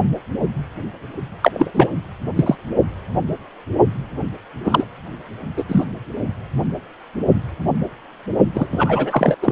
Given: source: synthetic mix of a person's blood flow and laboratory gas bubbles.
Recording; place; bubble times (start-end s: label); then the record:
Doppler ultrasound of blood flow; precordium
1.42-1.69 s: bubbles
1.74-1.92 s: bubbles
2.35-2.55 s: bubbles
4.64-4.85 s: bubbles
5.56-5.64 s: bubbles
5.68-5.86 s: bubbles
8.54-8.69 s: bubbles
8.71-9.36 s: bubbles
9.42-9.52 s: bubbles
From the record:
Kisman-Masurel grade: 223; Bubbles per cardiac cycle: several, 3 to 8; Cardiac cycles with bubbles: 10 to 50%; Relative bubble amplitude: loud (0.450 to 0.775); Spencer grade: 2 (many but less than half of the cardiac periods contain bubble signals, singularly or in groups); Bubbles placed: only in the low amplitude regions of the cardiac cycle